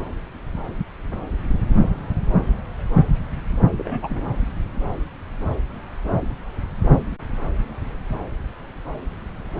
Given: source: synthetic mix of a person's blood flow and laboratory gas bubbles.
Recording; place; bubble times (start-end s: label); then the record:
Doppler ultrasound of blood flow; subclavian vein
3.77-4.21 s: bubbles
From the record:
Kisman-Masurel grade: 111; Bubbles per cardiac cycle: 1 to 2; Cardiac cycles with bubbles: 1 to 10%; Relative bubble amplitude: barely perceptible (0.100 to 0.250); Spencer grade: 1 (occasional bubble signal discernible with the cardiac motion signal, with majority of cardiac periods free of bubbles); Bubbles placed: anywhere in the cardiac cycle